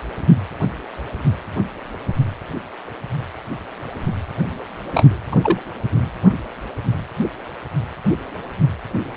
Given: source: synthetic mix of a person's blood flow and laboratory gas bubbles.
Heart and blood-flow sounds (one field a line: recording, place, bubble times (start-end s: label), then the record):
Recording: Doppler ultrasound of blood flow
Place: precordium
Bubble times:
4.86-5.18 s: bubbles
5.32-5.35 s: bubbles
5.42-5.57 s: bubbles
From the record:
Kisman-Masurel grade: 123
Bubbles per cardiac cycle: 1 to 2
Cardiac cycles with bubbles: 10 to 50%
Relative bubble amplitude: loud (0.450 to 0.775)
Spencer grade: 2 (many but less than half of the cardiac periods contain bubble signals, singularly or in groups)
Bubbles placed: anywhere in the cardiac cycle